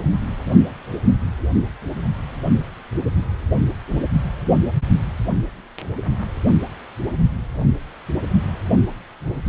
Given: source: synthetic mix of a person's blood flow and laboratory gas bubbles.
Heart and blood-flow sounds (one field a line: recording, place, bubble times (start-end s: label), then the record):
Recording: Doppler ultrasound of blood flow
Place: precordium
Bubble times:
no bubbles
From the record:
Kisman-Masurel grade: 000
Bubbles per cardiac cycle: 0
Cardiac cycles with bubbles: 0%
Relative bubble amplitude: no bubbles discernible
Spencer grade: 0 (complete lack of bubble signals)